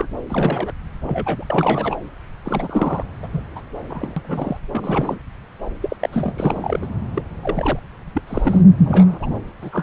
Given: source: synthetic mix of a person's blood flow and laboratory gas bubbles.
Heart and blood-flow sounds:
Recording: Doppler ultrasound of blood flow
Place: subclavian vein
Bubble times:
0.00-0.08 s: bubbles
0.29-0.72 s: bubbles
1.02-1.44 s: bubbles
1.50-1.96 s: bubbles
2.45-3.03 s: bubbles
3.23-3.28 s: bubbles
3.33-3.40 s: bubbles
3.56-3.61 s: bubbles
3.90-4.57 s: bubbles
4.73-5.19 s: bubbles
5.82-5.96 s: bubbles
6.00-6.09 s: bubbles
6.12-6.33 s: bubbles
6.37-6.87 s: bubbles
7.12-7.22 s: bubbles
7.42-7.79 s: bubbles
8.14-8.21 s: bubbles
8.27-8.62 s: bubbles
8.86-9.29 s: bubbles
9.62-9.83 s: bubbles
From the record:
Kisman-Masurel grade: 232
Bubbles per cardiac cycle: several, 3 to 8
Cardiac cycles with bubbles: 50 to 99%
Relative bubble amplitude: moderate (0.250 to 0.450)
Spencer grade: 3 (all of the cardiac periods contain showers or single bubble signals, but not dominating or overriding the cardiac motion signals)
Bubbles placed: anywhere in the cardiac cycle

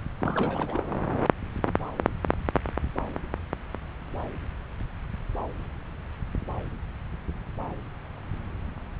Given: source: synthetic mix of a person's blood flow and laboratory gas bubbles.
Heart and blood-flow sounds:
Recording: Doppler ultrasound of blood flow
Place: subclavian vein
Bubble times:
0.18-0.80 s: bubbles
From the record:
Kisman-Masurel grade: 211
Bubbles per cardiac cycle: several, 3 to 8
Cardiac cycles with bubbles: 1 to 10%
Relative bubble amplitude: barely perceptible (0.100 to 0.250)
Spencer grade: 1 (occasional bubble signal discernible with the cardiac motion signal, with majority of cardiac periods free of bubbles)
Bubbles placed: anywhere in the cardiac cycle

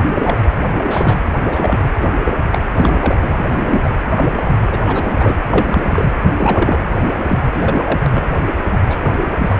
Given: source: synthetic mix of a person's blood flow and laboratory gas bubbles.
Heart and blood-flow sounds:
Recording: Doppler ultrasound of blood flow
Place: precordium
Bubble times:
0.06-0.47 s: bubbles
0.83-1.17 s: bubbles
1.31-1.98 s: bubbles
2.01-2.08 s: bubbles
2.25-2.33 s: bubbles
2.52-2.60 s: bubbles
2.75-3.17 s: bubbles
3.23-3.27 s: bubbles
3.37-3.94 s: bubbles
4.13-4.76 s: bubbles
4.83-5.34 s: bubbles
5.50-6.13 s: bubbles
6.38-6.78 s: bubbles
7.06-7.14 s: bubbles
7.26-8.00 s: bubbles
8.06-8.26 s: bubbles
8.84-8.99 s: bubbles
9.04-9.58 s: bubbles
From the record:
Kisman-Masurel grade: 242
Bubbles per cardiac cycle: several, 3 to 8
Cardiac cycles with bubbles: 100%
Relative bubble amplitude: moderate (0.250 to 0.450)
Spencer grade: 3 (all of the cardiac periods contain showers or single bubble signals, but not dominating or overriding the cardiac motion signals)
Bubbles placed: anywhere in the cardiac cycle

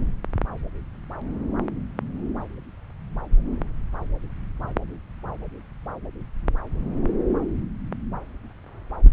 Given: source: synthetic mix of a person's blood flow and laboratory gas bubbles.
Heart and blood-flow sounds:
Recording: Doppler ultrasound of blood flow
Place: subclavian vein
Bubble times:
no bubbles
From the record:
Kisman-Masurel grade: 000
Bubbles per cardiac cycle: 0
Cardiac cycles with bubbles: 0%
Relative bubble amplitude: no bubbles discernible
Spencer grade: 0 (complete lack of bubble signals)

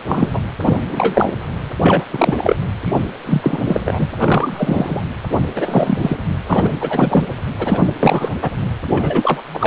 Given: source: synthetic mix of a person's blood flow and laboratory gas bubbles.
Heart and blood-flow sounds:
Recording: Doppler ultrasound of blood flow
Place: precordium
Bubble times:
0.00-0.03 s: bubbles
0.05-0.41 s: bubbles
0.66-0.81 s: bubbles
0.89-1.32 s: bubbles
1.81-2.04 s: bubbles
2.12-2.56 s: bubbles
2.86-3.06 s: bubbles
3.25-3.62 s: bubbles
3.68-4.08 s: bubbles
4.20-5.03 s: bubbles
5.56-5.99 s: bubbles
6.02-6.17 s: bubbles
6.46-6.71 s: bubbles
6.79-7.25 s: bubbles
7.58-7.93 s: bubbles
7.99-8.33 s: bubbles
8.42-8.51 s: bubbles
8.90-9.42 s: bubbles
9.54-9.67 s: bubbles
From the record:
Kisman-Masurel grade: 343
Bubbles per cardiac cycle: rolling drumbeat, 9 or more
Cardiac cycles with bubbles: 100%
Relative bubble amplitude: loud (0.450 to 0.775)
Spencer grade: 3 (all of the cardiac periods contain showers or single bubble signals, but not dominating or overriding the cardiac motion signals)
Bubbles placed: anywhere in the cardiac cycle

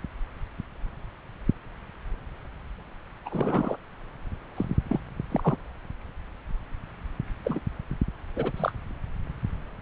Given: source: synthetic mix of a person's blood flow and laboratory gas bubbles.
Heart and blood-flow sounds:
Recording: Doppler ultrasound of blood flow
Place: subclavian vein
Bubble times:
3.25-3.77 s: bubbles
4.57-4.65 s: bubbles
4.84-5.00 s: bubbles
5.31-5.57 s: bubbles
7.45-7.60 s: bubbles
8.36-8.52 s: bubbles
8.56-8.71 s: bubbles
From the record:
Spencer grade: 2 (many but less than half of the cardiac periods contain bubble signals, singularly or in groups)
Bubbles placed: anywhere in the cardiac cycle

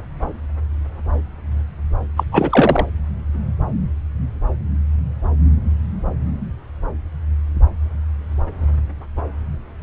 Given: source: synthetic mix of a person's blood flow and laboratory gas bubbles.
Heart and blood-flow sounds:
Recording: Doppler ultrasound of blood flow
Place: subclavian vein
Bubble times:
2.17-2.23 s: bubbles
2.31-2.85 s: bubbles
From the record:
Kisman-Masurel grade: 213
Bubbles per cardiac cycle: several, 3 to 8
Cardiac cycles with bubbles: 1 to 10%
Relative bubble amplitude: loud (0.450 to 0.775)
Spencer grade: 1 (occasional bubble signal discernible with the cardiac motion signal, with majority of cardiac periods free of bubbles)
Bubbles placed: anywhere in the cardiac cycle

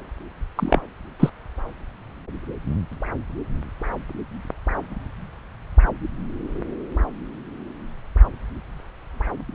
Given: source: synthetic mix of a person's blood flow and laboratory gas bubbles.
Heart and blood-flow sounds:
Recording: Doppler ultrasound of blood flow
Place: subclavian vein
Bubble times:
0.56-0.80 s: bubbles
1.19-1.29 s: bubbles
From the record:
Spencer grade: 1 (occasional bubble signal discernible with the cardiac motion signal, with majority of cardiac periods free of bubbles)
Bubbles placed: anywhere in the cardiac cycle

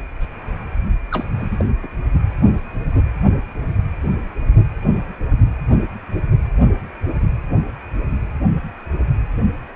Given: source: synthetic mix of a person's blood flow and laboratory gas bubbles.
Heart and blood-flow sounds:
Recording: Doppler ultrasound of blood flow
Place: precordium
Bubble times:
1.11-1.25 s: bubbles
1.38-1.65 s: bubbles
1.82-1.88 s: bubbles
From the record:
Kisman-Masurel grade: 211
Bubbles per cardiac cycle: several, 3 to 8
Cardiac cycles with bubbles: 1 to 10%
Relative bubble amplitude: barely perceptible (0.100 to 0.250)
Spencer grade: 1 (occasional bubble signal discernible with the cardiac motion signal, with majority of cardiac periods free of bubbles)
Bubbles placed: only in the low amplitude regions of the cardiac cycle

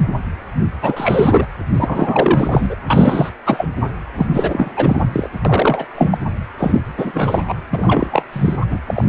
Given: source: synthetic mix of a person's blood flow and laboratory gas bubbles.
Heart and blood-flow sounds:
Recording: Doppler ultrasound of blood flow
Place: precordium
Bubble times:
0.80-1.46 s: bubbles
1.73-2.75 s: bubbles
2.88-3.29 s: bubbles
3.45-3.69 s: bubbles
4.16-4.28 s: bubbles
4.31-4.71 s: bubbles
4.77-5.02 s: bubbles
5.12-5.29 s: bubbles
5.45-5.86 s: bubbles
5.95-6.18 s: bubbles
6.58-6.82 s: bubbles
6.96-7.54 s: bubbles
7.71-8.24 s: bubbles
8.32-8.56 s: bubbles
8.60-8.66 s: bubbles
8.70-8.79 s: bubbles
8.87-9.04 s: bubbles
From the record:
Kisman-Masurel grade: 333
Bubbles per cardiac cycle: rolling drumbeat, 9 or more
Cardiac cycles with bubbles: 50 to 99%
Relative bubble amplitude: loud (0.450 to 0.775)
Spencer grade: 3 (all of the cardiac periods contain showers or single bubble signals, but not dominating or overriding the cardiac motion signals)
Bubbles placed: anywhere in the cardiac cycle

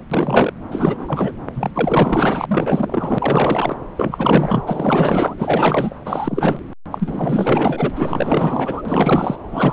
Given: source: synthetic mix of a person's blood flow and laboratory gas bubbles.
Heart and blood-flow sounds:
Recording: Doppler ultrasound of blood flow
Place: subclavian vein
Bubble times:
0.11-0.53 s: bubbles
0.70-1.32 s: bubbles
1.53-1.71 s: bubbles
1.73-2.46 s: bubbles
2.48-3.77 s: bubbles
3.96-4.63 s: bubbles
4.67-5.96 s: bubbles
6.05-6.62 s: bubbles
6.91-7.90 s: bubbles
7.95-8.82 s: bubbles
8.85-9.36 s: bubbles
9.51-9.73 s: bubbles
From the record:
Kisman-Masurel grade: 444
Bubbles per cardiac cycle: continuous sound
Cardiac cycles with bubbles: 100%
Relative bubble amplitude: maximal (0.775 to 0.999)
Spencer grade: 4 (maximum detectable bubble signal sounding continuously throughout systole and diastole of every cardiac period, and overriding the amplitude of the normal cardiac signals)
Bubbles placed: anywhere in the cardiac cycle

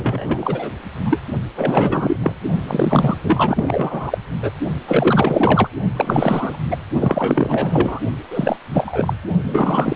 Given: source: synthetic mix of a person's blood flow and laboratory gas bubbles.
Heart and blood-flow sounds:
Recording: Doppler ultrasound of blood flow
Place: precordium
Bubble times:
0.00-0.70 s: bubbles
1.04-1.21 s: bubbles
1.55-2.17 s: bubbles
2.21-2.33 s: bubbles
2.67-3.17 s: bubbles
3.23-4.18 s: bubbles
4.42-4.51 s: bubbles
4.87-5.70 s: bubbles
5.96-6.58 s: bubbles
6.71-6.77 s: bubbles
6.99-8.00 s: bubbles
8.30-8.57 s: bubbles
8.73-9.13 s: bubbles
9.43-9.96 s: bubbles
From the record:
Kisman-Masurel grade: 444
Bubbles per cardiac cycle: continuous sound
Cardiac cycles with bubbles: 100%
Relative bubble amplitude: maximal (0.775 to 0.999)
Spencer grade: 4 (maximum detectable bubble signal sounding continuously throughout systole and diastole of every cardiac period, and overriding the amplitude of the normal cardiac signals)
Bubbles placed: only in the low amplitude regions of the cardiac cycle

